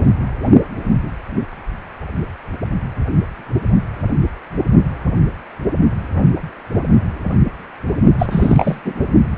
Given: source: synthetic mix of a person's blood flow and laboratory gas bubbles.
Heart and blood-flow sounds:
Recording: Doppler ultrasound of blood flow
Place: precordium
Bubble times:
8.19-8.27 s: bubbles
8.30-8.80 s: bubbles
8.85-8.93 s: bubbles
From the record:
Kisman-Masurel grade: 213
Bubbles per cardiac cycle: several, 3 to 8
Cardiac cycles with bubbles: 1 to 10%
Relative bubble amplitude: loud (0.450 to 0.775)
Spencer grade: 1 (occasional bubble signal discernible with the cardiac motion signal, with majority of cardiac periods free of bubbles)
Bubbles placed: only in the low amplitude regions of the cardiac cycle

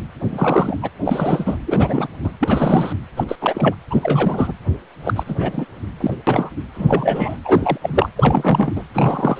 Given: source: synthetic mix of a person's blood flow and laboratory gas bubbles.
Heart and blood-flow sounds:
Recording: Doppler ultrasound of blood flow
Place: precordium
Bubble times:
0.31-0.76 s: bubbles
0.82-0.90 s: bubbles
1.04-1.57 s: bubbles
1.66-2.08 s: bubbles
2.24-2.31 s: bubbles
2.41-2.93 s: bubbles
3.17-3.24 s: bubbles
3.28-3.36 s: bubbles
3.41-3.75 s: bubbles
3.90-4.53 s: bubbles
5.05-5.24 s: bubbles
5.27-5.65 s: bubbles
6.00-6.14 s: bubbles
6.27-6.50 s: bubbles
6.75-7.38 s: bubbles
7.45-7.78 s: bubbles
7.82-8.09 s: bubbles
8.15-8.72 s: bubbles
8.75-8.83 s: bubbles
8.94-9.40 s: bubbles
From the record:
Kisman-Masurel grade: 342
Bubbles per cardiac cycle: rolling drumbeat, 9 or more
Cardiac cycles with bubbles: 100%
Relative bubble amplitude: moderate (0.250 to 0.450)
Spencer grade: 3 (all of the cardiac periods contain showers or single bubble signals, but not dominating or overriding the cardiac motion signals)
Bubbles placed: anywhere in the cardiac cycle

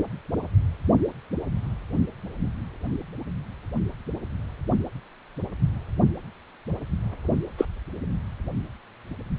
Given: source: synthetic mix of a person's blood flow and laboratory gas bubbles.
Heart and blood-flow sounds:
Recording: Doppler ultrasound of blood flow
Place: precordium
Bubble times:
7.58-7.65 s: bubbles
From the record:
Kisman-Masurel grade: 113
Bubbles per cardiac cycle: 1 to 2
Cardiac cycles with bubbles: 1 to 10%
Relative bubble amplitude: loud (0.450 to 0.775)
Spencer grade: 1 (occasional bubble signal discernible with the cardiac motion signal, with majority of cardiac periods free of bubbles)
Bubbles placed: anywhere in the cardiac cycle

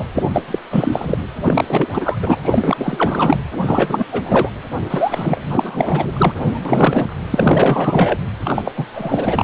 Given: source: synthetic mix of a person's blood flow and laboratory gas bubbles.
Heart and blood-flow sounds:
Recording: Doppler ultrasound of blood flow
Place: precordium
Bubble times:
0.00-0.05 s: bubbles
0.15-0.23 s: bubbles
0.33-0.42 s: bubbles
0.48-0.59 s: bubbles
0.70-1.17 s: bubbles
1.43-1.87 s: bubbles
1.92-2.19 s: bubbles
2.21-2.40 s: bubbles
2.44-3.38 s: bubbles
3.65-4.05 s: bubbles
4.12-4.51 s: bubbles
4.90-5.41 s: bubbles
5.49-6.61 s: bubbles
6.65-7.14 s: bubbles
7.33-8.20 s: bubbles
8.45-8.62 s: bubbles
8.64-8.72 s: bubbles
8.76-8.86 s: bubbles
8.94-9.44 s: bubbles
From the record:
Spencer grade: 4 (maximum detectable bubble signal sounding continuously throughout systole and diastole of every cardiac period, and overriding the amplitude of the normal cardiac signals)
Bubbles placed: anywhere in the cardiac cycle

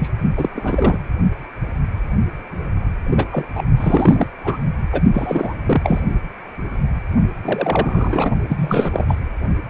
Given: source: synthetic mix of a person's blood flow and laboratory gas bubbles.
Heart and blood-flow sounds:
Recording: Doppler ultrasound of blood flow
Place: precordium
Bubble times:
0.00-0.10 s: bubbles
0.36-0.49 s: bubbles
0.54-0.98 s: bubbles
3.10-3.25 s: bubbles
3.31-3.45 s: bubbles
3.55-3.63 s: bubbles
3.77-4.27 s: bubbles
4.44-4.58 s: bubbles
4.92-5.00 s: bubbles
5.13-5.53 s: bubbles
5.65-6.00 s: bubbles
7.44-8.30 s: bubbles
8.48-9.05 s: bubbles
9.07-9.15 s: bubbles
From the record:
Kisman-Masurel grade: 232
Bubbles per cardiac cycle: several, 3 to 8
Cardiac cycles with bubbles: 50 to 99%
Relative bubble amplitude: moderate (0.250 to 0.450)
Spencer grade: 3 (all of the cardiac periods contain showers or single bubble signals, but not dominating or overriding the cardiac motion signals)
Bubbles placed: only in the low amplitude regions of the cardiac cycle

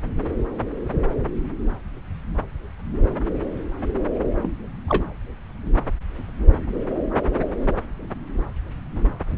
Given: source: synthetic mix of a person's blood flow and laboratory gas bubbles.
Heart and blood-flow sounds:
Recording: Doppler ultrasound of blood flow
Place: subclavian vein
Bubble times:
4.42-4.48 s: bubbles
4.88-5.04 s: bubbles
From the record:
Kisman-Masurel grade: 112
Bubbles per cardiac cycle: 1 to 2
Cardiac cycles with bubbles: 1 to 10%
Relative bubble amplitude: moderate (0.250 to 0.450)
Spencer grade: 1 (occasional bubble signal discernible with the cardiac motion signal, with majority of cardiac periods free of bubbles)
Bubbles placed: anywhere in the cardiac cycle

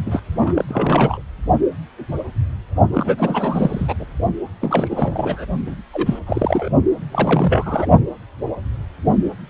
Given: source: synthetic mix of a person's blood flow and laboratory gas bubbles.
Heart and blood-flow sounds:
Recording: Doppler ultrasound of blood flow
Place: precordium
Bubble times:
0.06-0.21 s: bubbles
0.39-0.65 s: bubbles
0.68-1.22 s: bubbles
2.92-3.94 s: bubbles
3.99-4.06 s: bubbles
4.60-5.46 s: bubbles
5.66-5.76 s: bubbles
5.93-6.19 s: bubbles
6.26-6.70 s: bubbles
7.11-7.90 s: bubbles
From the record:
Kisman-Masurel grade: 332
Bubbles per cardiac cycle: rolling drumbeat, 9 or more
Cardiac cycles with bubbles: 50 to 99%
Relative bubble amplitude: moderate (0.250 to 0.450)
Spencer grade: 3 (all of the cardiac periods contain showers or single bubble signals, but not dominating or overriding the cardiac motion signals)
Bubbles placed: only in the low amplitude regions of the cardiac cycle

